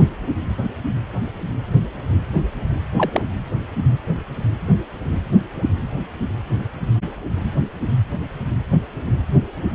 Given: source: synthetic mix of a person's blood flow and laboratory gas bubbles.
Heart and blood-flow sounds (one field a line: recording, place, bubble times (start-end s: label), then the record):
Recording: Doppler ultrasound of blood flow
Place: precordium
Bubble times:
2.97-3.11 s: bubbles
3.14-3.22 s: bubbles
From the record:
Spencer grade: 1 (occasional bubble signal discernible with the cardiac motion signal, with majority of cardiac periods free of bubbles)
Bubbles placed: anywhere in the cardiac cycle